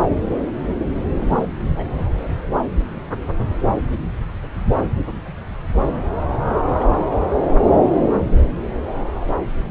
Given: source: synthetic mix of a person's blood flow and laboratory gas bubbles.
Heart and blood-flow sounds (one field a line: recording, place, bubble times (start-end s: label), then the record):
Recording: Doppler ultrasound of blood flow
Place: subclavian vein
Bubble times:
1.19-1.45 s: bubbles
1.76-1.85 s: bubbles
6.79-6.84 s: bubbles
From the record:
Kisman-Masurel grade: 121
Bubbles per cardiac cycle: 1 to 2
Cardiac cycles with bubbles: 10 to 50%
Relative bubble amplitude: barely perceptible (0.100 to 0.250)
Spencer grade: 2 (many but less than half of the cardiac periods contain bubble signals, singularly or in groups)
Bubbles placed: anywhere in the cardiac cycle